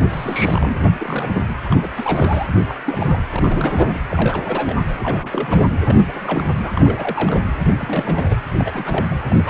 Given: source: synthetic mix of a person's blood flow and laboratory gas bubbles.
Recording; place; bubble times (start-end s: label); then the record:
Doppler ultrasound of blood flow; precordium
0.10-0.89 s: bubbles
0.99-1.44 s: bubbles
1.65-1.87 s: bubbles
1.97-2.47 s: bubbles
2.69-2.75 s: bubbles
2.86-3.21 s: bubbles
3.29-4.00 s: bubbles
4.09-4.81 s: bubbles
5.00-5.62 s: bubbles
5.88-6.50 s: bubbles
6.62-7.41 s: bubbles
7.78-8.37 s: bubbles
8.55-9.18 s: bubbles
9.28-9.50 s: bubbles
From the record:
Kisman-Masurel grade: 342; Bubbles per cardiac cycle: rolling drumbeat, 9 or more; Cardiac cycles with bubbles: 100%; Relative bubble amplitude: moderate (0.250 to 0.450); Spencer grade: 3 (all of the cardiac periods contain showers or single bubble signals, but not dominating or overriding the cardiac motion signals); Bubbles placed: anywhere in the cardiac cycle